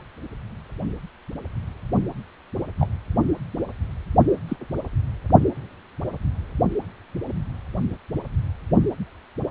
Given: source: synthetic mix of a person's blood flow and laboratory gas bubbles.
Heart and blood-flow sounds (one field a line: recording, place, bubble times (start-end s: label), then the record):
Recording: Doppler ultrasound of blood flow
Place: precordium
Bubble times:
2.79-2.88 s: bubbles
4.31-4.37 s: bubbles
4.48-4.56 s: bubbles
From the record:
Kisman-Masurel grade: 121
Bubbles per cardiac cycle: 1 to 2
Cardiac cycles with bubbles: 10 to 50%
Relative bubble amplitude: barely perceptible (0.100 to 0.250)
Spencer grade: 2 (many but less than half of the cardiac periods contain bubble signals, singularly or in groups)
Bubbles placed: only in the low amplitude regions of the cardiac cycle